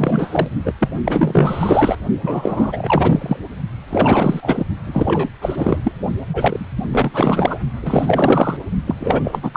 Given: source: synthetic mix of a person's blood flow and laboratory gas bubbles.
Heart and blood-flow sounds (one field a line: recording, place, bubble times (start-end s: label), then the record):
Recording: Doppler ultrasound of blood flow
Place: precordium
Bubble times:
0.00-0.47 s: bubbles
0.65-0.73 s: bubbles
0.80-0.89 s: bubbles
1.05-1.96 s: bubbles
2.21-3.37 s: bubbles
3.89-4.65 s: bubbles
4.86-5.29 s: bubbles
5.41-5.91 s: bubbles
6.33-6.64 s: bubbles
6.76-6.82 s: bubbles
6.91-7.59 s: bubbles
7.82-8.58 s: bubbles
8.87-8.95 s: bubbles
8.98-9.57 s: bubbles
From the record:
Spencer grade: 4 (maximum detectable bubble signal sounding continuously throughout systole and diastole of every cardiac period, and overriding the amplitude of the normal cardiac signals)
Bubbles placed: only in the low amplitude regions of the cardiac cycle